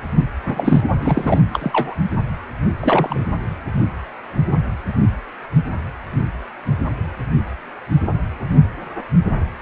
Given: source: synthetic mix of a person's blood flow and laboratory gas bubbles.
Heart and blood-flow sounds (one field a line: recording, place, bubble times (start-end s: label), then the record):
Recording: Doppler ultrasound of blood flow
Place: precordium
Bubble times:
0.44-0.84 s: bubbles
1.00-1.43 s: bubbles
1.53-1.94 s: bubbles
2.81-3.25 s: bubbles
From the record:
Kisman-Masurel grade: 222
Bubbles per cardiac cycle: several, 3 to 8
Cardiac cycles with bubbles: 10 to 50%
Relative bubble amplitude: moderate (0.250 to 0.450)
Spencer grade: 2 (many but less than half of the cardiac periods contain bubble signals, singularly or in groups)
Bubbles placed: anywhere in the cardiac cycle